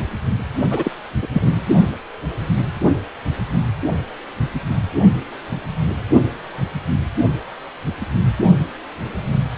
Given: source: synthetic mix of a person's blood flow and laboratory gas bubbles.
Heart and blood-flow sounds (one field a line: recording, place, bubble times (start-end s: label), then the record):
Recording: Doppler ultrasound of blood flow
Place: precordium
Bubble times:
0.70-0.91 s: bubbles
1.22-1.27 s: bubbles
1.33-1.54 s: bubbles
From the record:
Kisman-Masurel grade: 223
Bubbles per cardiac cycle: several, 3 to 8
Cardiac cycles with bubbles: 10 to 50%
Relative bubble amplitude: loud (0.450 to 0.775)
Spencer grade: 2 (many but less than half of the cardiac periods contain bubble signals, singularly or in groups)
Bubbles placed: only in the low amplitude regions of the cardiac cycle